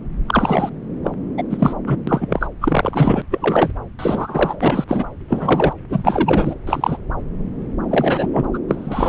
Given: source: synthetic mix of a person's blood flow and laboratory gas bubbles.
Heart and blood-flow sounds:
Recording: Doppler ultrasound of blood flow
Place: subclavian vein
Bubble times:
0.26-0.70 s: bubbles
1.04-1.10 s: bubbles
1.38-1.43 s: bubbles
1.50-1.73 s: bubbles
1.86-1.97 s: bubbles
2.07-2.48 s: bubbles
2.61-3.22 s: bubbles
3.30-3.73 s: bubbles
3.98-4.84 s: bubbles
4.88-5.05 s: bubbles
5.28-5.73 s: bubbles
5.90-6.55 s: bubbles
6.67-6.97 s: bubbles
7.90-8.28 s: bubbles
8.33-8.45 s: bubbles
8.54-8.59 s: bubbles
8.69-9.09 s: bubbles
From the record:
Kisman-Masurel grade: 243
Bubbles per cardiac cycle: several, 3 to 8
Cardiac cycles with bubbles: 100%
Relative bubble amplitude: loud (0.450 to 0.775)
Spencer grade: 3 (all of the cardiac periods contain showers or single bubble signals, but not dominating or overriding the cardiac motion signals)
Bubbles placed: anywhere in the cardiac cycle

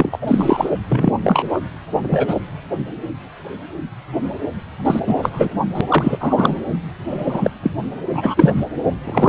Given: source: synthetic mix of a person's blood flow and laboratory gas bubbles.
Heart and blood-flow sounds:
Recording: Doppler ultrasound of blood flow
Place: precordium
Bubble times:
0.00-0.69 s: bubbles
0.89-1.11 s: bubbles
1.23-1.60 s: bubbles
2.02-2.40 s: bubbles
4.85-5.00 s: bubbles
5.06-5.30 s: bubbles
5.33-5.50 s: bubbles
5.75-5.81 s: bubbles
5.88-6.17 s: bubbles
6.20-6.60 s: bubbles
7.09-7.50 s: bubbles
7.63-7.71 s: bubbles
8.12-8.52 s: bubbles
8.56-8.65 s: bubbles
9.04-9.29 s: bubbles
From the record:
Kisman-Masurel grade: 233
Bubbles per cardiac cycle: several, 3 to 8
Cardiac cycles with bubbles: 50 to 99%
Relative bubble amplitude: loud (0.450 to 0.775)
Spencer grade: 3 (all of the cardiac periods contain showers or single bubble signals, but not dominating or overriding the cardiac motion signals)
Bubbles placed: anywhere in the cardiac cycle

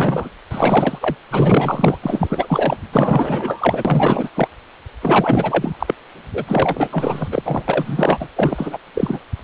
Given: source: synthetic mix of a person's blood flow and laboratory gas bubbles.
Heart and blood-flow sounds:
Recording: Doppler ultrasound of blood flow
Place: precordium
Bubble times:
0.00-0.29 s: bubbles
0.51-1.16 s: bubbles
1.30-1.97 s: bubbles
2.02-2.77 s: bubbles
2.92-4.30 s: bubbles
4.35-4.48 s: bubbles
5.01-5.94 s: bubbles
6.33-7.28 s: bubbles
7.31-8.28 s: bubbles
8.36-8.78 s: bubbles
8.95-9.19 s: bubbles
From the record:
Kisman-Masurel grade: 444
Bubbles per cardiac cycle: continuous sound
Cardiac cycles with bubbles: 100%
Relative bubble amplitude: maximal (0.775 to 0.999)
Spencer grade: 4 (maximum detectable bubble signal sounding continuously throughout systole and diastole of every cardiac period, and overriding the amplitude of the normal cardiac signals)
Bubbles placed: anywhere in the cardiac cycle

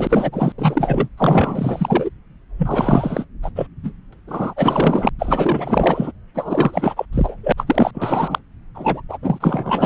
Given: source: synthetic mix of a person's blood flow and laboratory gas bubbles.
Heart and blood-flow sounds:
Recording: Doppler ultrasound of blood flow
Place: subclavian vein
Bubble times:
0.00-0.53 s: bubbles
0.58-1.08 s: bubbles
1.18-2.10 s: bubbles
2.58-3.25 s: bubbles
3.42-3.50 s: bubbles
3.55-3.67 s: bubbles
3.83-3.93 s: bubbles
4.12-4.15 s: bubbles
4.27-4.54 s: bubbles
4.56-5.09 s: bubbles
5.19-6.12 s: bubbles
6.34-7.06 s: bubbles
7.12-7.37 s: bubbles
7.43-7.53 s: bubbles
7.57-7.91 s: bubbles
7.94-8.39 s: bubbles
8.74-9.01 s: bubbles
9.09-9.18 s: bubbles
9.22-9.86 s: bubbles
From the record:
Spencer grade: 4 (maximum detectable bubble signal sounding continuously throughout systole and diastole of every cardiac period, and overriding the amplitude of the normal cardiac signals)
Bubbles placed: anywhere in the cardiac cycle

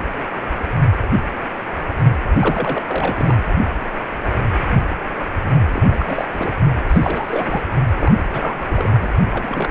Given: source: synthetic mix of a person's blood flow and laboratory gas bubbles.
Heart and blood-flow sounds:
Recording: Doppler ultrasound of blood flow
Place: precordium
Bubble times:
2.40-3.45 s: bubbles
5.73-6.28 s: bubbles
6.31-6.51 s: bubbles
6.88-7.61 s: bubbles
7.99-8.12 s: bubbles
8.19-8.24 s: bubbles
8.33-8.92 s: bubbles
9.01-9.11 s: bubbles
9.32-9.71 s: bubbles
From the record:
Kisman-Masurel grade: 332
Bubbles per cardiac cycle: rolling drumbeat, 9 or more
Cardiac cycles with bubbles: 50 to 99%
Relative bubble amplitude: moderate (0.250 to 0.450)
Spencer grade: 3 (all of the cardiac periods contain showers or single bubble signals, but not dominating or overriding the cardiac motion signals)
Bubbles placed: anywhere in the cardiac cycle

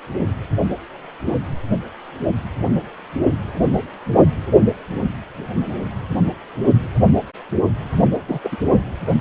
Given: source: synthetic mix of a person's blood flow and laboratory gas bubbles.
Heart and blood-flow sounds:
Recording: Doppler ultrasound of blood flow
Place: precordium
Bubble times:
8.28-8.39 s: bubbles
8.43-8.57 s: bubbles
From the record:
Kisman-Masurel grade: 212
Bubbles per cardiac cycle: several, 3 to 8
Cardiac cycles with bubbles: 1 to 10%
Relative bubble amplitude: moderate (0.250 to 0.450)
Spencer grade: 1 (occasional bubble signal discernible with the cardiac motion signal, with majority of cardiac periods free of bubbles)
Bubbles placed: only in the low amplitude regions of the cardiac cycle

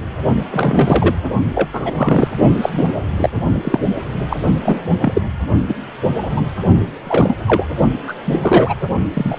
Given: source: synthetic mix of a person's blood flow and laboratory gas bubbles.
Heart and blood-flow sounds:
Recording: Doppler ultrasound of blood flow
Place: precordium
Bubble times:
0.50-1.15 s: bubbles
1.54-1.68 s: bubbles
1.72-1.80 s: bubbles
1.84-2.28 s: bubbles
2.62-2.88 s: bubbles
3.17-3.30 s: bubbles
3.34-3.80 s: bubbles
4.29-4.37 s: bubbles
4.63-4.79 s: bubbles
5.01-5.21 s: bubbles
5.67-5.75 s: bubbles
6.23-6.29 s: bubbles
6.36-6.42 s: bubbles
7.04-7.42 s: bubbles
7.47-7.65 s: bubbles
8.06-8.13 s: bubbles
8.24-8.75 s: bubbles
9.13-9.39 s: bubbles
From the record:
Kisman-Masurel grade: 233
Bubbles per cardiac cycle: several, 3 to 8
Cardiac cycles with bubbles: 50 to 99%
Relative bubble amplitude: loud (0.450 to 0.775)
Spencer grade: 3 (all of the cardiac periods contain showers or single bubble signals, but not dominating or overriding the cardiac motion signals)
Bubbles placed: only in the low amplitude regions of the cardiac cycle

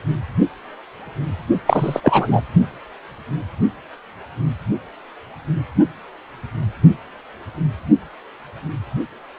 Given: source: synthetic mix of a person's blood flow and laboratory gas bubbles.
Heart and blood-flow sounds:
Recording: Doppler ultrasound of blood flow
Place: precordium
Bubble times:
1.65-2.00 s: bubbles
2.03-2.41 s: bubbles
From the record:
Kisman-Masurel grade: 223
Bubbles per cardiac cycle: several, 3 to 8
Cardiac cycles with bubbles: 10 to 50%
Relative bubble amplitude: loud (0.450 to 0.775)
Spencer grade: 2 (many but less than half of the cardiac periods contain bubble signals, singularly or in groups)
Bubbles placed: only in the low amplitude regions of the cardiac cycle

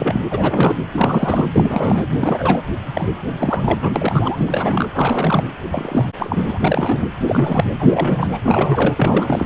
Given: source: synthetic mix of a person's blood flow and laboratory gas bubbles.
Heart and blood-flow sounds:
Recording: Doppler ultrasound of blood flow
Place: precordium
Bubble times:
0.00-0.27 s: bubbles
0.30-0.78 s: bubbles
0.93-1.46 s: bubbles
1.53-2.06 s: bubbles
2.10-2.62 s: bubbles
2.94-3.10 s: bubbles
3.38-4.90 s: bubbles
4.94-5.43 s: bubbles
5.71-6.10 s: bubbles
6.18-6.44 s: bubbles
6.47-7.08 s: bubbles
7.26-7.64 s: bubbles
7.79-8.28 s: bubbles
8.31-8.40 s: bubbles
8.45-9.46 s: bubbles
From the record:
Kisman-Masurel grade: 343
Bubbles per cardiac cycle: rolling drumbeat, 9 or more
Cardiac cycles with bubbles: 100%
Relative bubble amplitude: loud (0.450 to 0.775)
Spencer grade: 3 (all of the cardiac periods contain showers or single bubble signals, but not dominating or overriding the cardiac motion signals)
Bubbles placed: anywhere in the cardiac cycle

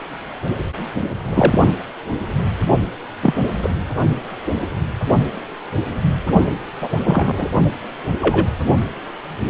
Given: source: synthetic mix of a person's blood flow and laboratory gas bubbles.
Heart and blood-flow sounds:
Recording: Doppler ultrasound of blood flow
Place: precordium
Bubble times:
1.25-1.59 s: bubbles
3.22-3.34 s: bubbles
3.62-3.70 s: bubbles
6.81-6.88 s: bubbles
7.05-7.46 s: bubbles
8.21-8.46 s: bubbles
From the record:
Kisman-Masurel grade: 123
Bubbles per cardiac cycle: 1 to 2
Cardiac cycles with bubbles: 10 to 50%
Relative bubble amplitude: loud (0.450 to 0.775)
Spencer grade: 2 (many but less than half of the cardiac periods contain bubble signals, singularly or in groups)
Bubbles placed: only in the low amplitude regions of the cardiac cycle

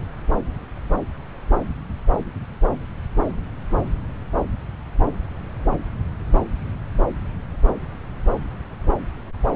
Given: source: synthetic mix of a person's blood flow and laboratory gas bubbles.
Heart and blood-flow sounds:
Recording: Doppler ultrasound of blood flow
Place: subclavian vein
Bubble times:
no bubbles
From the record:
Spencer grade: 0 (complete lack of bubble signals)

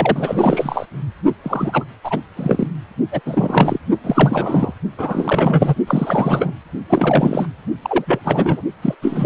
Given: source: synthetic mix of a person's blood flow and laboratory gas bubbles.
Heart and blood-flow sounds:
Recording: Doppler ultrasound of blood flow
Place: precordium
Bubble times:
0.00-0.86 s: bubbles
1.43-1.85 s: bubbles
2.04-2.21 s: bubbles
2.35-2.67 s: bubbles
3.12-3.21 s: bubbles
3.25-3.79 s: bubbles
4.04-4.73 s: bubbles
4.97-5.75 s: bubbles
5.87-6.52 s: bubbles
6.89-7.46 s: bubbles
7.82-8.20 s: bubbles
8.24-8.62 s: bubbles
8.82-8.95 s: bubbles
9.02-9.26 s: bubbles
From the record:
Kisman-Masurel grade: 343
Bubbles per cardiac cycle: rolling drumbeat, 9 or more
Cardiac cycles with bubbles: 100%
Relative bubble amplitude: loud (0.450 to 0.775)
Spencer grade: 3 (all of the cardiac periods contain showers or single bubble signals, but not dominating or overriding the cardiac motion signals)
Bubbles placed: only in the low amplitude regions of the cardiac cycle

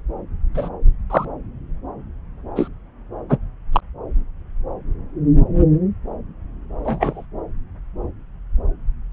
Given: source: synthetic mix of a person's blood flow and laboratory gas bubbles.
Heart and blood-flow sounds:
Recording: Doppler ultrasound of blood flow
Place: subclavian vein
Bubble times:
0.54-0.69 s: bubbles
1.10-1.25 s: bubbles
2.56-2.68 s: bubbles
3.29-3.38 s: bubbles
3.72-3.80 s: bubbles
6.84-7.25 s: bubbles
From the record:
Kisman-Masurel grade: 123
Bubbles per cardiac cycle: 1 to 2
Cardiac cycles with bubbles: 10 to 50%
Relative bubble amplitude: loud (0.450 to 0.775)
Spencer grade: 2 (many but less than half of the cardiac periods contain bubble signals, singularly or in groups)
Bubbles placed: anywhere in the cardiac cycle

